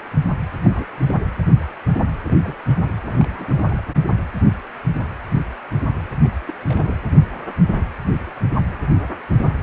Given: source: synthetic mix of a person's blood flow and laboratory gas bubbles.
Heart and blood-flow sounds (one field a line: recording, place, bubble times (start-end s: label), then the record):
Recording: Doppler ultrasound of blood flow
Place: precordium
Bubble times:
0.60-0.87 s: bubbles
1.01-1.14 s: bubbles
2.23-2.56 s: bubbles
2.69-2.75 s: bubbles
2.77-2.92 s: bubbles
3.02-3.81 s: bubbles
6.23-6.28 s: bubbles
6.47-6.52 s: bubbles
6.63-6.95 s: bubbles
From the record:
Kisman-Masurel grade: 221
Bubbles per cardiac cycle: several, 3 to 8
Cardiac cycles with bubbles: 10 to 50%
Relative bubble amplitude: barely perceptible (0.100 to 0.250)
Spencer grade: 2 (many but less than half of the cardiac periods contain bubble signals, singularly or in groups)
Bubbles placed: anywhere in the cardiac cycle